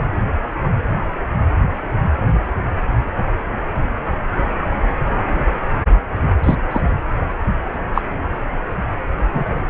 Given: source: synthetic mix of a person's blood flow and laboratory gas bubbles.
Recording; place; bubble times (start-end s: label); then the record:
Doppler ultrasound of blood flow; precordium
6.44-6.55 s: bubbles
6.71-6.82 s: bubbles
7.94-8.01 s: bubbles
9.32-9.60 s: bubbles
From the record:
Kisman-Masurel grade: 123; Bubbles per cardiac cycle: 1 to 2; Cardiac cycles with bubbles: 10 to 50%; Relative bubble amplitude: loud (0.450 to 0.775); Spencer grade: 2 (many but less than half of the cardiac periods contain bubble signals, singularly or in groups); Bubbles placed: anywhere in the cardiac cycle